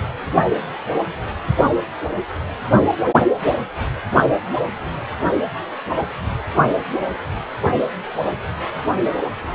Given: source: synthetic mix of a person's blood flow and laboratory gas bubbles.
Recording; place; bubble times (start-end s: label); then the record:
Doppler ultrasound of blood flow; precordium
5.93-6.07 s: bubbles
From the record:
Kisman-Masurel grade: 111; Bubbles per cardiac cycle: 1 to 2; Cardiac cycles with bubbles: 1 to 10%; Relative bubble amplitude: barely perceptible (0.100 to 0.250); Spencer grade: 1 (occasional bubble signal discernible with the cardiac motion signal, with majority of cardiac periods free of bubbles); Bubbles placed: only in the low amplitude regions of the cardiac cycle